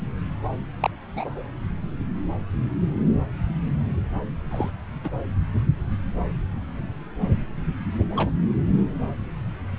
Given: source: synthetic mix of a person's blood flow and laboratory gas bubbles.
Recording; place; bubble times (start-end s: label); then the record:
Doppler ultrasound of blood flow; subclavian vein
0.81-0.91 s: bubbles
1.15-1.42 s: bubbles
4.50-4.71 s: bubbles
5.04-5.11 s: bubbles
8.16-8.31 s: bubbles
From the record:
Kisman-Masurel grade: 121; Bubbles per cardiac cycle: 1 to 2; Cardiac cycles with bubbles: 10 to 50%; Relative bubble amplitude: barely perceptible (0.100 to 0.250); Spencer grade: 2 (many but less than half of the cardiac periods contain bubble signals, singularly or in groups); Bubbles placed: anywhere in the cardiac cycle